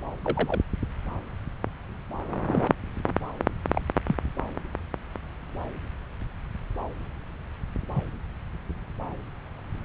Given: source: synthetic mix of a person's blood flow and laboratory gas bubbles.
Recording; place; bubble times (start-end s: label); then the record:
Doppler ultrasound of blood flow; subclavian vein
0.24-0.60 s: bubbles
2.48-2.74 s: bubbles
3.75-3.81 s: bubbles
4.08-4.16 s: bubbles
7.96-8.03 s: bubbles
From the record:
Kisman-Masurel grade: 121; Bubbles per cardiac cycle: 1 to 2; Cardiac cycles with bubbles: 10 to 50%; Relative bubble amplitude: barely perceptible (0.100 to 0.250); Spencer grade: 2 (many but less than half of the cardiac periods contain bubble signals, singularly or in groups); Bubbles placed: anywhere in the cardiac cycle